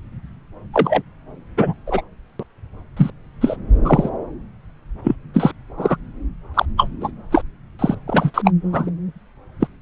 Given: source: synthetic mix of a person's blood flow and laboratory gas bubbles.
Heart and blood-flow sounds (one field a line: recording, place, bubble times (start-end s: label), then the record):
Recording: Doppler ultrasound of blood flow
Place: subclavian vein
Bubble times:
0.73-1.02 s: bubbles
1.57-1.73 s: bubbles
1.86-2.02 s: bubbles
2.39-2.43 s: bubbles
2.96-3.10 s: bubbles
3.40-3.56 s: bubbles
3.84-4.10 s: bubbles
5.03-5.16 s: bubbles
5.33-5.52 s: bubbles
5.77-5.97 s: bubbles
6.54-6.66 s: bubbles
6.78-6.89 s: bubbles
7.00-7.12 s: bubbles
7.31-7.42 s: bubbles
7.79-7.95 s: bubbles
8.07-8.31 s: bubbles
8.34-8.42 s: bubbles
8.45-8.51 s: bubbles
8.72-8.91 s: bubbles
9.60-9.67 s: bubbles
From the record:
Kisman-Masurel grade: 243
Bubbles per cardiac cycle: several, 3 to 8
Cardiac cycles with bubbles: 100%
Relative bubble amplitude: loud (0.450 to 0.775)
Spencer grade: 3 (all of the cardiac periods contain showers or single bubble signals, but not dominating or overriding the cardiac motion signals)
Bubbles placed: anywhere in the cardiac cycle